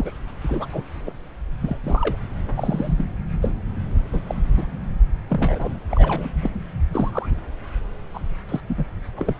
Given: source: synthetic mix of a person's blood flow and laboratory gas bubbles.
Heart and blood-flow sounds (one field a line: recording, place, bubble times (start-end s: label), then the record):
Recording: Doppler ultrasound of blood flow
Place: subclavian vein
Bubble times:
0.00-0.11 s: bubbles
0.44-0.66 s: bubbles
0.72-0.83 s: bubbles
1.06-1.12 s: bubbles
1.60-1.78 s: bubbles
1.84-2.17 s: bubbles
2.57-2.94 s: bubbles
2.97-3.05 s: bubbles
3.41-3.53 s: bubbles
4.12-4.21 s: bubbles
4.27-4.35 s: bubbles
4.56-4.67 s: bubbles
5.29-5.74 s: bubbles
5.92-6.29 s: bubbles
6.42-6.50 s: bubbles
6.92-7.29 s: bubbles
8.14-8.20 s: bubbles
8.48-8.61 s: bubbles
8.67-8.85 s: bubbles
9.16-9.33 s: bubbles
From the record:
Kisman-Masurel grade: 242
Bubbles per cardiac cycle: several, 3 to 8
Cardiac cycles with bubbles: 100%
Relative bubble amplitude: moderate (0.250 to 0.450)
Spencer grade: 3 (all of the cardiac periods contain showers or single bubble signals, but not dominating or overriding the cardiac motion signals)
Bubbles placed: anywhere in the cardiac cycle